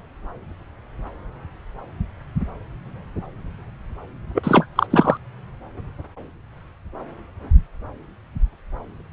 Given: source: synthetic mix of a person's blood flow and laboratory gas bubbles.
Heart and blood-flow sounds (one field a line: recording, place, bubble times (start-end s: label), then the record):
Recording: Doppler ultrasound of blood flow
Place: subclavian vein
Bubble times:
4.35-4.66 s: bubbles
4.75-4.87 s: bubbles
4.90-5.17 s: bubbles
From the record:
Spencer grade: 1 (occasional bubble signal discernible with the cardiac motion signal, with majority of cardiac periods free of bubbles)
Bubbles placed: anywhere in the cardiac cycle